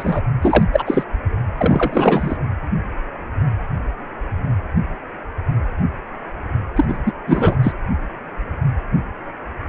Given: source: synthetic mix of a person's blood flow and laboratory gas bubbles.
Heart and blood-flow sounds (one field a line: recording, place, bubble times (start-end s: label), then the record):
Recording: Doppler ultrasound of blood flow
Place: precordium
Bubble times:
0.00-0.21 s: bubbles
0.42-0.63 s: bubbles
0.73-0.83 s: bubbles
0.86-1.04 s: bubbles
1.56-2.37 s: bubbles
6.76-6.86 s: bubbles
6.88-6.98 s: bubbles
7.06-7.12 s: bubbles
7.27-7.57 s: bubbles
7.63-7.72 s: bubbles
From the record:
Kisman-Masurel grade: 223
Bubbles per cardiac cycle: several, 3 to 8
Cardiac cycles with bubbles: 10 to 50%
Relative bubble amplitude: loud (0.450 to 0.775)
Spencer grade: 2 (many but less than half of the cardiac periods contain bubble signals, singularly or in groups)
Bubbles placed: anywhere in the cardiac cycle